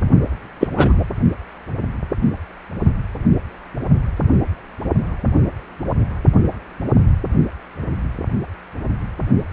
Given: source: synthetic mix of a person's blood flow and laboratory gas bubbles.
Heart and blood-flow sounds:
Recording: Doppler ultrasound of blood flow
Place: precordium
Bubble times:
0.60-0.68 s: bubbles
0.77-1.04 s: bubbles
From the record:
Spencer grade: 2 (many but less than half of the cardiac periods contain bubble signals, singularly or in groups)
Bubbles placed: only in the low amplitude regions of the cardiac cycle

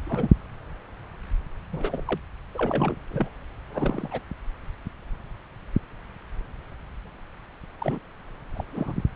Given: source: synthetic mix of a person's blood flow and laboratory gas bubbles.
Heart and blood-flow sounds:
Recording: Doppler ultrasound of blood flow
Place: subclavian vein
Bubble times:
0.05-0.31 s: bubbles
1.72-2.20 s: bubbles
2.54-2.96 s: bubbles
3.10-3.29 s: bubbles
3.70-4.20 s: bubbles
7.79-7.99 s: bubbles
8.54-8.64 s: bubbles
8.72-8.93 s: bubbles
From the record:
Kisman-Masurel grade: 232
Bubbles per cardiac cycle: several, 3 to 8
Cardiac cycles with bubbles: 50 to 99%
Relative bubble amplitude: moderate (0.250 to 0.450)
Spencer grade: 3 (all of the cardiac periods contain showers or single bubble signals, but not dominating or overriding the cardiac motion signals)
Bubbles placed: anywhere in the cardiac cycle

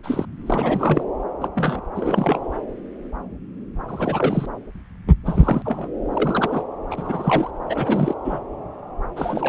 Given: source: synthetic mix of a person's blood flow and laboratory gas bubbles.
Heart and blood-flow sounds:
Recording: Doppler ultrasound of blood flow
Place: subclavian vein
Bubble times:
0.03-0.25 s: bubbles
0.46-1.03 s: bubbles
1.40-1.48 s: bubbles
1.55-1.81 s: bubbles
1.95-2.40 s: bubbles
3.88-4.46 s: bubbles
5.25-5.62 s: bubbles
5.65-5.88 s: bubbles
6.13-6.64 s: bubbles
6.91-7.50 s: bubbles
7.69-8.14 s: bubbles
8.24-8.40 s: bubbles
9.16-9.49 s: bubbles
From the record:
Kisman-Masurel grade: 232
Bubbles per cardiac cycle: several, 3 to 8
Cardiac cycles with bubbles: 50 to 99%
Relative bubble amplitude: moderate (0.250 to 0.450)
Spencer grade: 3 (all of the cardiac periods contain showers or single bubble signals, but not dominating or overriding the cardiac motion signals)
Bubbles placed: anywhere in the cardiac cycle

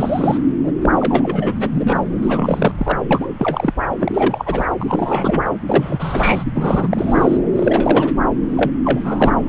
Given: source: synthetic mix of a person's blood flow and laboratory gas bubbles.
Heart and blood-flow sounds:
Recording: Doppler ultrasound of blood flow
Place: subclavian vein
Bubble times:
0.00-0.38 s: bubbles
0.62-0.72 s: bubbles
0.82-0.90 s: bubbles
0.99-1.56 s: bubbles
1.59-2.01 s: bubbles
2.21-2.71 s: bubbles
2.77-2.98 s: bubbles
3.10-3.27 s: bubbles
3.38-3.73 s: bubbles
3.99-4.66 s: bubbles
4.79-5.43 s: bubbles
5.69-6.44 s: bubbles
6.55-7.43 s: bubbles
7.56-8.16 s: bubbles
8.56-8.71 s: bubbles
8.85-9.00 s: bubbles
9.04-9.49 s: bubbles
From the record:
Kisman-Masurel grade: 342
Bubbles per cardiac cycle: rolling drumbeat, 9 or more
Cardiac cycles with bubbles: 100%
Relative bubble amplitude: moderate (0.250 to 0.450)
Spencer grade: 3 (all of the cardiac periods contain showers or single bubble signals, but not dominating or overriding the cardiac motion signals)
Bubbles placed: anywhere in the cardiac cycle

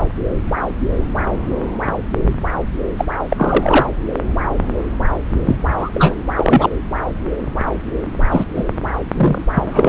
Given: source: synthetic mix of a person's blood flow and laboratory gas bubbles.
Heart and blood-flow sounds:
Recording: Doppler ultrasound of blood flow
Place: subclavian vein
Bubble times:
2.97-3.05 s: bubbles
3.29-3.87 s: bubbles
5.45-5.56 s: bubbles
5.78-5.89 s: bubbles
5.94-6.14 s: bubbles
6.36-6.70 s: bubbles
8.31-8.45 s: bubbles
8.55-8.65 s: bubbles
9.17-9.44 s: bubbles
9.54-9.89 s: bubbles
From the record:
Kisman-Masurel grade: 223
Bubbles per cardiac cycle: several, 3 to 8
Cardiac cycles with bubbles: 10 to 50%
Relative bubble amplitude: loud (0.450 to 0.775)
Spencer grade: 2 (many but less than half of the cardiac periods contain bubble signals, singularly or in groups)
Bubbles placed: anywhere in the cardiac cycle

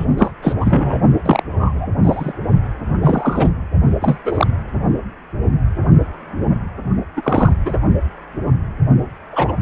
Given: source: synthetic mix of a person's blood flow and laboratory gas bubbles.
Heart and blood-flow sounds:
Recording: Doppler ultrasound of blood flow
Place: precordium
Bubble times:
0.00-0.05 s: bubbles
0.09-0.32 s: bubbles
0.42-0.54 s: bubbles
0.60-0.99 s: bubbles
1.23-1.43 s: bubbles
1.49-1.90 s: bubbles
2.02-2.33 s: bubbles
3.02-3.52 s: bubbles
4.01-4.18 s: bubbles
4.25-4.47 s: bubbles
7.16-7.53 s: bubbles
7.65-7.76 s: bubbles
9.33-9.54 s: bubbles
From the record:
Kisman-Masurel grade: 233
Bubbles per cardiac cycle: several, 3 to 8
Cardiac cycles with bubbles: 50 to 99%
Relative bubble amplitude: loud (0.450 to 0.775)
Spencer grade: 3 (all of the cardiac periods contain showers or single bubble signals, but not dominating or overriding the cardiac motion signals)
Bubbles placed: only in the low amplitude regions of the cardiac cycle

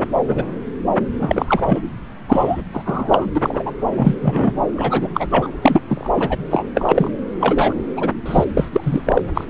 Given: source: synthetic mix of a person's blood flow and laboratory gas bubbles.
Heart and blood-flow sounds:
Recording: Doppler ultrasound of blood flow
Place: subclavian vein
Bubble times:
0.00-0.06 s: bubbles
0.27-0.53 s: bubbles
1.20-1.82 s: bubbles
2.28-2.62 s: bubbles
2.73-3.26 s: bubbles
3.35-3.72 s: bubbles
3.92-4.16 s: bubbles
4.22-4.53 s: bubbles
4.75-5.08 s: bubbles
5.14-5.28 s: bubbles
5.30-5.54 s: bubbles
5.62-5.81 s: bubbles
5.88-6.11 s: bubbles
6.16-6.37 s: bubbles
6.51-6.65 s: bubbles
6.75-7.11 s: bubbles
7.39-7.73 s: bubbles
7.96-8.10 s: bubbles
8.26-8.45 s: bubbles
8.57-8.69 s: bubbles
8.72-9.22 s: bubbles
9.34-9.45 s: bubbles
From the record:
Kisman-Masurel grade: 243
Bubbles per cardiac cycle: several, 3 to 8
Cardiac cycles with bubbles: 100%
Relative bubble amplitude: loud (0.450 to 0.775)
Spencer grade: 3 (all of the cardiac periods contain showers or single bubble signals, but not dominating or overriding the cardiac motion signals)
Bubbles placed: anywhere in the cardiac cycle

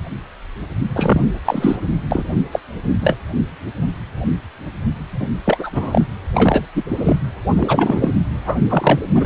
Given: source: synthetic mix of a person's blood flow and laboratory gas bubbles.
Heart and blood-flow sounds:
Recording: Doppler ultrasound of blood flow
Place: precordium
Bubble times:
0.93-1.29 s: bubbles
1.45-1.76 s: bubbles
2.11-2.23 s: bubbles
2.52-2.60 s: bubbles
3.02-3.16 s: bubbles
5.20-5.30 s: bubbles
5.45-5.70 s: bubbles
5.72-6.05 s: bubbles
6.33-6.67 s: bubbles
6.75-6.84 s: bubbles
6.91-7.17 s: bubbles
7.56-8.15 s: bubbles
8.45-8.56 s: bubbles
8.69-8.99 s: bubbles
9.14-9.25 s: bubbles
From the record:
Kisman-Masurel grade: 233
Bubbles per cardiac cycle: several, 3 to 8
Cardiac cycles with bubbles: 50 to 99%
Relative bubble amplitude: loud (0.450 to 0.775)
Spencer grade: 3 (all of the cardiac periods contain showers or single bubble signals, but not dominating or overriding the cardiac motion signals)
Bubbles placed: anywhere in the cardiac cycle

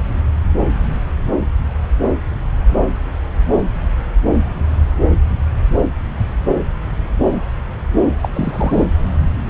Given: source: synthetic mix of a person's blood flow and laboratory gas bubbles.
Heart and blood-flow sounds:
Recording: Doppler ultrasound of blood flow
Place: subclavian vein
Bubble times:
8.21-8.29 s: bubbles
8.33-8.85 s: bubbles
From the record:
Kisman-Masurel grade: 112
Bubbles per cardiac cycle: 1 to 2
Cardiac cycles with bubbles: 1 to 10%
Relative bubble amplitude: moderate (0.250 to 0.450)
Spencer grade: 1 (occasional bubble signal discernible with the cardiac motion signal, with majority of cardiac periods free of bubbles)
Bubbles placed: anywhere in the cardiac cycle

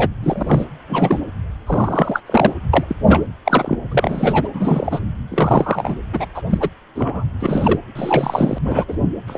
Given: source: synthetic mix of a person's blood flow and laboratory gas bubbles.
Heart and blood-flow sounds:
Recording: Doppler ultrasound of blood flow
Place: precordium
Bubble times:
0.00-0.08 s: bubbles
0.23-0.65 s: bubbles
0.89-1.21 s: bubbles
1.67-2.21 s: bubbles
2.26-2.53 s: bubbles
2.73-2.85 s: bubbles
2.89-2.96 s: bubbles
3.02-3.25 s: bubbles
3.45-3.76 s: bubbles
3.91-4.48 s: bubbles
4.53-5.00 s: bubbles
5.31-6.00 s: bubbles
6.13-6.25 s: bubbles
6.34-6.42 s: bubbles
6.49-6.69 s: bubbles
6.95-7.24 s: bubbles
7.40-7.79 s: bubbles
7.95-8.58 s: bubbles
8.63-8.84 s: bubbles
8.88-8.97 s: bubbles
9.27-9.38 s: bubbles
From the record:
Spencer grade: 3 (all of the cardiac periods contain showers or single bubble signals, but not dominating or overriding the cardiac motion signals)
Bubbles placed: anywhere in the cardiac cycle

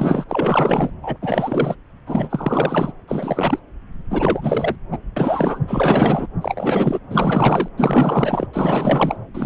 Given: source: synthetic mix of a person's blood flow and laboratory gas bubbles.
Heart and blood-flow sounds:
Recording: Doppler ultrasound of blood flow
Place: subclavian vein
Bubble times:
0.00-0.25 s: bubbles
0.29-0.90 s: bubbles
1.02-1.17 s: bubbles
1.21-1.75 s: bubbles
2.06-2.92 s: bubbles
3.07-3.59 s: bubbles
4.10-4.76 s: bubbles
4.91-4.99 s: bubbles
5.16-5.59 s: bubbles
5.67-6.27 s: bubbles
6.41-7.00 s: bubbles
7.10-7.68 s: bubbles
7.77-8.47 s: bubbles
8.53-9.17 s: bubbles
9.34-9.45 s: bubbles
From the record:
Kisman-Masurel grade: 444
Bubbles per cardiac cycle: continuous sound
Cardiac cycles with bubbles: 100%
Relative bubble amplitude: maximal (0.775 to 0.999)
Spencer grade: 4 (maximum detectable bubble signal sounding continuously throughout systole and diastole of every cardiac period, and overriding the amplitude of the normal cardiac signals)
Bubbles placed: anywhere in the cardiac cycle

